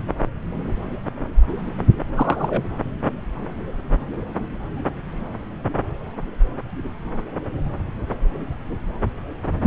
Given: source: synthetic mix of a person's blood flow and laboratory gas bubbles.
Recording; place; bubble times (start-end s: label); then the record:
Doppler ultrasound of blood flow; subclavian vein
2.17-2.63 s: bubbles
From the record:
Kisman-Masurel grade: 112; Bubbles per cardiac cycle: 1 to 2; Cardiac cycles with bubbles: 1 to 10%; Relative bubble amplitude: moderate (0.250 to 0.450); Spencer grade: 1 (occasional bubble signal discernible with the cardiac motion signal, with majority of cardiac periods free of bubbles); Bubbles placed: anywhere in the cardiac cycle